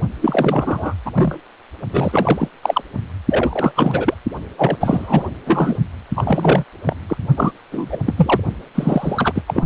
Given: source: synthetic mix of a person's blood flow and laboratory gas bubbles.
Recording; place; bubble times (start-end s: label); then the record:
Doppler ultrasound of blood flow; precordium
0.21-0.94 s: bubbles
1.05-1.11 s: bubbles
1.15-1.40 s: bubbles
1.92-2.48 s: bubbles
2.62-2.82 s: bubbles
3.30-3.72 s: bubbles
3.76-4.14 s: bubbles
4.58-4.76 s: bubbles
4.80-5.30 s: bubbles
5.46-5.77 s: bubbles
6.15-6.64 s: bubbles
6.86-6.96 s: bubbles
7.08-7.17 s: bubbles
7.36-7.51 s: bubbles
7.71-8.01 s: bubbles
8.06-8.14 s: bubbles
8.17-8.41 s: bubbles
8.75-9.43 s: bubbles
9.48-9.64 s: bubbles
From the record:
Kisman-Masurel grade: 343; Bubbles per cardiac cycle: rolling drumbeat, 9 or more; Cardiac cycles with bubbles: 100%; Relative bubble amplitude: loud (0.450 to 0.775); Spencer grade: 3 (all of the cardiac periods contain showers or single bubble signals, but not dominating or overriding the cardiac motion signals); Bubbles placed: only in the low amplitude regions of the cardiac cycle